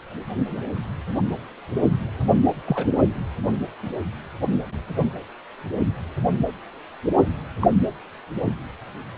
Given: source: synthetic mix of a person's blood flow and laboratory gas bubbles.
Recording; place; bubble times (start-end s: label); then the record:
Doppler ultrasound of blood flow; precordium
2.66-2.87 s: bubbles
7.61-7.68 s: bubbles
From the record:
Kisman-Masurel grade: 121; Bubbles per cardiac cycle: 1 to 2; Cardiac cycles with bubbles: 10 to 50%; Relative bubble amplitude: barely perceptible (0.100 to 0.250); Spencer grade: 2 (many but less than half of the cardiac periods contain bubble signals, singularly or in groups); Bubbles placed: anywhere in the cardiac cycle